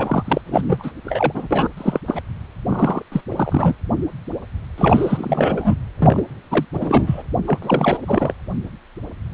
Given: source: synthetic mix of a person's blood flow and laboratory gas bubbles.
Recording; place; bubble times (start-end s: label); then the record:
Doppler ultrasound of blood flow; precordium
0.00-0.41 s: bubbles
0.46-0.91 s: bubbles
1.04-1.47 s: bubbles
1.50-1.68 s: bubbles
1.77-2.00 s: bubbles
2.07-2.21 s: bubbles
2.69-3.02 s: bubbles
3.11-3.21 s: bubbles
3.31-3.76 s: bubbles
4.78-5.77 s: bubbles
6.00-6.23 s: bubbles
6.51-6.66 s: bubbles
6.73-7.22 s: bubbles
7.47-7.58 s: bubbles
7.62-7.98 s: bubbles
8.05-8.33 s: bubbles
From the record:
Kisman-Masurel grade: 332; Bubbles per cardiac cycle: rolling drumbeat, 9 or more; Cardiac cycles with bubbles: 50 to 99%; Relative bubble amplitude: moderate (0.250 to 0.450); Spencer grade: 3 (all of the cardiac periods contain showers or single bubble signals, but not dominating or overriding the cardiac motion signals); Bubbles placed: anywhere in the cardiac cycle